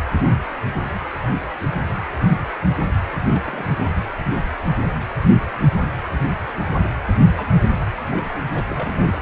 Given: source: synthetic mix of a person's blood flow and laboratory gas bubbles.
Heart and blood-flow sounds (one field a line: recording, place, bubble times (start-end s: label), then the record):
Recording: Doppler ultrasound of blood flow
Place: precordium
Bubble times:
3.31-3.42 s: bubbles
3.45-3.91 s: bubbles
7.36-7.50 s: bubbles
7.80-7.86 s: bubbles
8.10-8.37 s: bubbles
8.54-8.63 s: bubbles
8.69-9.10 s: bubbles
9.13-9.19 s: bubbles
From the record:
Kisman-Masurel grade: 221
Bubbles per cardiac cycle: several, 3 to 8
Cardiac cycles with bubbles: 10 to 50%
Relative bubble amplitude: barely perceptible (0.100 to 0.250)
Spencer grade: 2 (many but less than half of the cardiac periods contain bubble signals, singularly or in groups)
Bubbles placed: anywhere in the cardiac cycle